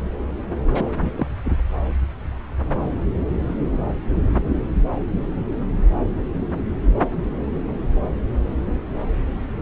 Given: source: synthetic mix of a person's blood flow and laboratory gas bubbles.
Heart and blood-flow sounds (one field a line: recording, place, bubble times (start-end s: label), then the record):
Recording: Doppler ultrasound of blood flow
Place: subclavian vein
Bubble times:
0.74-0.90 s: bubbles
0.96-1.10 s: bubbles
1.15-1.27 s: bubbles
1.44-1.56 s: bubbles
From the record:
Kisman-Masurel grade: 222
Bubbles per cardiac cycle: several, 3 to 8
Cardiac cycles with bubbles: 10 to 50%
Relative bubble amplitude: moderate (0.250 to 0.450)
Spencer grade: 2 (many but less than half of the cardiac periods contain bubble signals, singularly or in groups)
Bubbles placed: anywhere in the cardiac cycle